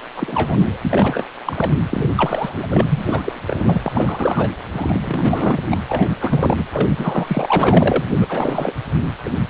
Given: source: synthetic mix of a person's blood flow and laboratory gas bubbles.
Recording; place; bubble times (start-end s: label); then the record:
Doppler ultrasound of blood flow; precordium
0.16-0.80 s: bubbles
0.82-1.24 s: bubbles
1.45-1.77 s: bubbles
1.90-2.13 s: bubbles
2.17-3.40 s: bubbles
3.47-3.78 s: bubbles
3.83-4.51 s: bubbles
4.71-5.58 s: bubbles
5.70-5.81 s: bubbles
5.89-6.08 s: bubbles
6.21-6.64 s: bubbles
6.70-8.04 s: bubbles
8.21-8.26 s: bubbles
8.29-8.73 s: bubbles
9.24-9.30 s: bubbles
From the record:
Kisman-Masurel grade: 343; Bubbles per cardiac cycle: rolling drumbeat, 9 or more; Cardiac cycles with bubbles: 100%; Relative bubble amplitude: loud (0.450 to 0.775); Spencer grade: 3 (all of the cardiac periods contain showers or single bubble signals, but not dominating or overriding the cardiac motion signals); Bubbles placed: anywhere in the cardiac cycle